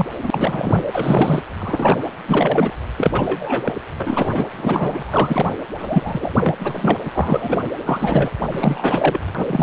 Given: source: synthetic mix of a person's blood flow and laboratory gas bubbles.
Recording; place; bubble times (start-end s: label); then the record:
Doppler ultrasound of blood flow; precordium
0.00-0.06 s: bubbles
0.22-0.85 s: bubbles
0.93-1.42 s: bubbles
1.59-2.02 s: bubbles
2.26-2.74 s: bubbles
2.97-3.73 s: bubbles
3.99-4.45 s: bubbles
4.57-5.54 s: bubbles
5.79-6.33 s: bubbles
6.42-6.54 s: bubbles
6.60-6.97 s: bubbles
7.05-7.11 s: bubbles
7.14-7.65 s: bubbles
7.84-8.30 s: bubbles
8.49-9.19 s: bubbles
9.36-9.63 s: bubbles
From the record:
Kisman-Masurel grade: 343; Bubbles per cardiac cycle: rolling drumbeat, 9 or more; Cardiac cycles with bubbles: 100%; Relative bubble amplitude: loud (0.450 to 0.775); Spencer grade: 3 (all of the cardiac periods contain showers or single bubble signals, but not dominating or overriding the cardiac motion signals); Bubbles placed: anywhere in the cardiac cycle